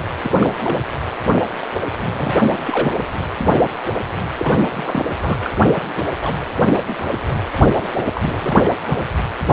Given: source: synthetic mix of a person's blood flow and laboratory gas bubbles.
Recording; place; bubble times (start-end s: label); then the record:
Doppler ultrasound of blood flow; precordium
0.00-0.03 s: bubbles
0.23-0.30 s: bubbles
0.40-0.50 s: bubbles
0.59-0.77 s: bubbles
2.01-2.54 s: bubbles
2.68-2.92 s: bubbles
3.41-3.51 s: bubbles
4.38-4.59 s: bubbles
4.71-5.06 s: bubbles
5.20-5.38 s: bubbles
5.42-5.52 s: bubbles
5.88-6.04 s: bubbles
6.21-6.36 s: bubbles
6.67-6.83 s: bubbles
6.87-6.96 s: bubbles
7.28-7.42 s: bubbles
7.78-7.87 s: bubbles
7.95-8.06 s: bubbles
8.14-8.71 s: bubbles
8.88-9.02 s: bubbles
From the record:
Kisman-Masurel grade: 232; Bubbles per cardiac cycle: several, 3 to 8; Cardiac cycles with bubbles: 50 to 99%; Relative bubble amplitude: moderate (0.250 to 0.450); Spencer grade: 3 (all of the cardiac periods contain showers or single bubble signals, but not dominating or overriding the cardiac motion signals); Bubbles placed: anywhere in the cardiac cycle